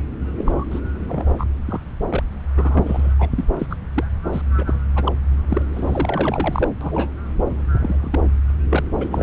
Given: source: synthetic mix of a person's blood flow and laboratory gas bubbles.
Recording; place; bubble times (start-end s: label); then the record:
Doppler ultrasound of blood flow; subclavian vein
0.38-0.65 s: bubbles
0.70-0.80 s: bubbles
1.07-1.45 s: bubbles
1.66-1.80 s: bubbles
2.10-2.23 s: bubbles
2.32-2.34 s: bubbles
2.57-3.15 s: bubbles
3.19-3.29 s: bubbles
3.37-3.44 s: bubbles
3.58-3.67 s: bubbles
3.70-3.76 s: bubbles
3.94-4.04 s: bubbles
4.32-4.42 s: bubbles
4.58-4.81 s: bubbles
4.96-5.12 s: bubbles
5.50-5.62 s: bubbles
5.73-6.68 s: bubbles
6.80-7.12 s: bubbles
7.49-7.64 s: bubbles
7.75-8.20 s: bubbles
8.70-8.83 s: bubbles
9.00-9.23 s: bubbles
From the record:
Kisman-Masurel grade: 232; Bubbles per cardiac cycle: several, 3 to 8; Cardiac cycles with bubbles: 50 to 99%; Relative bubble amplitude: moderate (0.250 to 0.450); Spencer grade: 3 (all of the cardiac periods contain showers or single bubble signals, but not dominating or overriding the cardiac motion signals); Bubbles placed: anywhere in the cardiac cycle